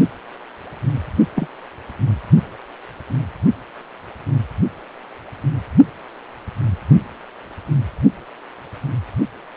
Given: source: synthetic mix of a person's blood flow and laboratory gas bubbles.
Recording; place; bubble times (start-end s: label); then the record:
Doppler ultrasound of blood flow; precordium
1.35-1.48 s: bubbles
From the record:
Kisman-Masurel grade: 112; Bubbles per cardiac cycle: 1 to 2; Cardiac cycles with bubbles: 1 to 10%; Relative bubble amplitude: moderate (0.250 to 0.450); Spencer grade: 1 (occasional bubble signal discernible with the cardiac motion signal, with majority of cardiac periods free of bubbles); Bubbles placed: only in the low amplitude regions of the cardiac cycle